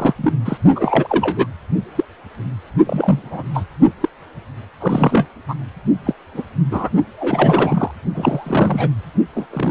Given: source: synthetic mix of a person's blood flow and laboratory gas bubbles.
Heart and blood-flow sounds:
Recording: Doppler ultrasound of blood flow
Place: precordium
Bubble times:
0.00-0.13 s: bubbles
0.17-0.32 s: bubbles
0.45-0.57 s: bubbles
0.75-1.47 s: bubbles
1.95-2.04 s: bubbles
2.86-3.43 s: bubbles
3.53-3.64 s: bubbles
4.00-4.08 s: bubbles
4.80-5.26 s: bubbles
5.48-5.54 s: bubbles
6.05-6.13 s: bubbles
6.34-6.42 s: bubbles
6.71-6.89 s: bubbles
7.19-7.91 s: bubbles
8.14-8.89 s: bubbles
9.35-9.46 s: bubbles
9.50-9.71 s: bubbles
From the record:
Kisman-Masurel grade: 233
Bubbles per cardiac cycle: several, 3 to 8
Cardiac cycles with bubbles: 50 to 99%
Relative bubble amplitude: loud (0.450 to 0.775)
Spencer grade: 3 (all of the cardiac periods contain showers or single bubble signals, but not dominating or overriding the cardiac motion signals)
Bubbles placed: only in the low amplitude regions of the cardiac cycle

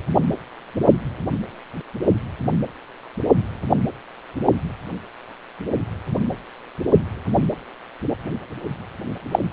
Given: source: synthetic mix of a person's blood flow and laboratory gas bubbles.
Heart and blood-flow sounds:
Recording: Doppler ultrasound of blood flow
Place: precordium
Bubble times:
9.31-9.39 s: bubbles
From the record:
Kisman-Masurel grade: 123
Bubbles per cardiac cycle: 1 to 2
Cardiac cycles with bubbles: 10 to 50%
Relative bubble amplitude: loud (0.450 to 0.775)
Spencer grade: 2 (many but less than half of the cardiac periods contain bubble signals, singularly or in groups)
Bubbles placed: only in the low amplitude regions of the cardiac cycle

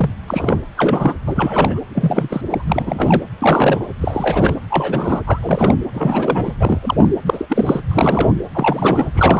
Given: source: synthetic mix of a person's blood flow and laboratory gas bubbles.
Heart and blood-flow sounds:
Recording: Doppler ultrasound of blood flow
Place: precordium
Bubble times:
0.00-0.10 s: bubbles
0.28-0.60 s: bubbles
0.76-1.15 s: bubbles
1.26-1.80 s: bubbles
1.95-2.41 s: bubbles
2.49-2.63 s: bubbles
2.67-3.22 s: bubbles
3.38-3.86 s: bubbles
4.01-4.57 s: bubbles
4.68-5.22 s: bubbles
5.26-5.75 s: bubbles
5.93-6.52 s: bubbles
6.59-6.79 s: bubbles
6.83-7.11 s: bubbles
7.25-7.81 s: bubbles
7.87-8.32 s: bubbles
8.53-9.09 s: bubbles
9.13-9.40 s: bubbles
From the record:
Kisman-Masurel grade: 343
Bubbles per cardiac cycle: rolling drumbeat, 9 or more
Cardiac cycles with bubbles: 100%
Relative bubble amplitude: loud (0.450 to 0.775)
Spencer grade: 3 (all of the cardiac periods contain showers or single bubble signals, but not dominating or overriding the cardiac motion signals)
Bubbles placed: anywhere in the cardiac cycle

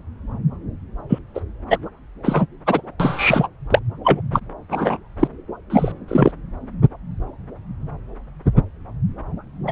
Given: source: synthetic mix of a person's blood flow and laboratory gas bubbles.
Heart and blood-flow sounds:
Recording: Doppler ultrasound of blood flow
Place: subclavian vein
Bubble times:
1.09-1.19 s: bubbles
1.34-1.41 s: bubbles
1.70-1.78 s: bubbles
2.25-2.46 s: bubbles
2.66-2.81 s: bubbles
3.00-3.48 s: bubbles
3.70-3.79 s: bubbles
4.04-4.21 s: bubbles
4.33-4.40 s: bubbles
4.71-4.97 s: bubbles
5.19-5.27 s: bubbles
5.70-5.92 s: bubbles
6.08-6.31 s: bubbles
9.67-9.72 s: bubbles
From the record:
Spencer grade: 2 (many but less than half of the cardiac periods contain bubble signals, singularly or in groups)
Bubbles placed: anywhere in the cardiac cycle

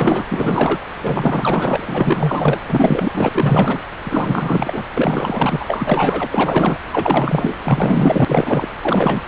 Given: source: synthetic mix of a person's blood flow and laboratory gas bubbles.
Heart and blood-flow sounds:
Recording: Doppler ultrasound of blood flow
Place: subclavian vein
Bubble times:
0.00-0.24 s: bubbles
0.29-0.78 s: bubbles
1.03-2.61 s: bubbles
2.68-3.29 s: bubbles
3.32-3.79 s: bubbles
4.04-4.84 s: bubbles
4.92-6.27 s: bubbles
6.31-6.79 s: bubbles
6.92-7.58 s: bubbles
7.63-8.68 s: bubbles
8.81-9.22 s: bubbles
From the record:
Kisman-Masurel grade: 444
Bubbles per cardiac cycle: continuous sound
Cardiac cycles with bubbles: 100%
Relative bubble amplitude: maximal (0.775 to 0.999)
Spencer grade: 4 (maximum detectable bubble signal sounding continuously throughout systole and diastole of every cardiac period, and overriding the amplitude of the normal cardiac signals)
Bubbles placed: anywhere in the cardiac cycle

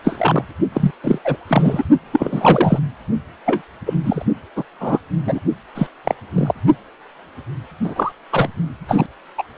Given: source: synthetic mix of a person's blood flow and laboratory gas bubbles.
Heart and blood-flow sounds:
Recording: Doppler ultrasound of blood flow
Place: precordium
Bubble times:
0.04-0.43 s: bubbles
0.73-0.91 s: bubbles
1.03-1.19 s: bubbles
1.24-1.36 s: bubbles
1.48-1.84 s: bubbles
2.12-2.79 s: bubbles
3.46-3.62 s: bubbles
3.86-3.94 s: bubbles
4.04-4.24 s: bubbles
4.56-4.64 s: bubbles
4.80-5.00 s: bubbles
5.25-5.40 s: bubbles
5.75-5.87 s: bubbles
6.04-6.15 s: bubbles
6.36-6.53 s: bubbles
7.84-8.12 s: bubbles
8.32-8.48 s: bubbles
8.88-9.06 s: bubbles
9.38-9.43 s: bubbles
From the record:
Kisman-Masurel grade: 243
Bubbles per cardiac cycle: several, 3 to 8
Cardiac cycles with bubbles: 100%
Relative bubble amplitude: loud (0.450 to 0.775)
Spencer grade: 3 (all of the cardiac periods contain showers or single bubble signals, but not dominating or overriding the cardiac motion signals)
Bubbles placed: only in the low amplitude regions of the cardiac cycle

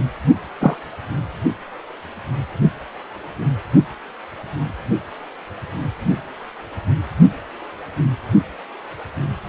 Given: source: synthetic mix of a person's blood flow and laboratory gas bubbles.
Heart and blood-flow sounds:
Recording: Doppler ultrasound of blood flow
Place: precordium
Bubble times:
0.60-0.76 s: bubbles
From the record:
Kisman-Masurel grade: 113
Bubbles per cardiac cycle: 1 to 2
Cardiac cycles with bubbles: 1 to 10%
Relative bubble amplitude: loud (0.450 to 0.775)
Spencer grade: 1 (occasional bubble signal discernible with the cardiac motion signal, with majority of cardiac periods free of bubbles)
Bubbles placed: only in the low amplitude regions of the cardiac cycle

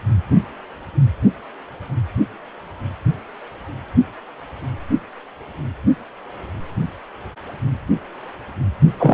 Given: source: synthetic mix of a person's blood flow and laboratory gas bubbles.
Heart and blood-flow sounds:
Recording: Doppler ultrasound of blood flow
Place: precordium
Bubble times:
8.98-9.13 s: bubbles
From the record:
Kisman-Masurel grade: 123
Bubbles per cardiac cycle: 1 to 2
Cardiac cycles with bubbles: 10 to 50%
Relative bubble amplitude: loud (0.450 to 0.775)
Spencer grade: 2 (many but less than half of the cardiac periods contain bubble signals, singularly or in groups)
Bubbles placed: only in the low amplitude regions of the cardiac cycle

